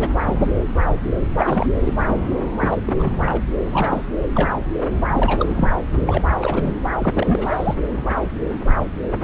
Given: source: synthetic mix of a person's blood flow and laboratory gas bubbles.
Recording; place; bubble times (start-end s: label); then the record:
Doppler ultrasound of blood flow; subclavian vein
0.00-0.08 s: bubbles
0.22-0.36 s: bubbles
0.41-0.47 s: bubbles
1.37-1.68 s: bubbles
1.83-2.27 s: bubbles
2.60-2.78 s: bubbles
2.86-2.96 s: bubbles
2.98-3.39 s: bubbles
3.63-4.03 s: bubbles
4.35-4.51 s: bubbles
5.10-5.76 s: bubbles
5.99-6.23 s: bubbles
6.39-6.77 s: bubbles
6.98-7.75 s: bubbles
From the record:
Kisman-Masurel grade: 332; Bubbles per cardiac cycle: rolling drumbeat, 9 or more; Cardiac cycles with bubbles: 50 to 99%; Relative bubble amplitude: moderate (0.250 to 0.450); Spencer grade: 3 (all of the cardiac periods contain showers or single bubble signals, but not dominating or overriding the cardiac motion signals); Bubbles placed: anywhere in the cardiac cycle